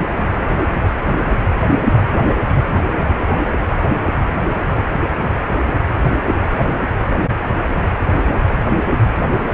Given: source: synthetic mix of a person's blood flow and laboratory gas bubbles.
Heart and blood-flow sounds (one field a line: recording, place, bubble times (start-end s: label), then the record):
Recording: Doppler ultrasound of blood flow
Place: precordium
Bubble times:
2.96-3.06 s: bubbles
3.19-3.43 s: bubbles
From the record:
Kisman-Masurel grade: 211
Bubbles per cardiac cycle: several, 3 to 8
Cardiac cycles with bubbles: 1 to 10%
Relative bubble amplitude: barely perceptible (0.100 to 0.250)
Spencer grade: 1 (occasional bubble signal discernible with the cardiac motion signal, with majority of cardiac periods free of bubbles)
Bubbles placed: anywhere in the cardiac cycle